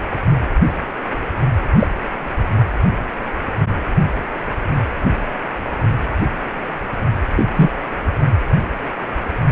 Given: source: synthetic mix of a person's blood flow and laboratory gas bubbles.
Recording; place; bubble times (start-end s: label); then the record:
Doppler ultrasound of blood flow; precordium
1.79-1.87 s: bubbles
7.35-7.46 s: bubbles
7.55-7.71 s: bubbles
From the record:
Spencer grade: 2 (many but less than half of the cardiac periods contain bubble signals, singularly or in groups); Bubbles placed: anywhere in the cardiac cycle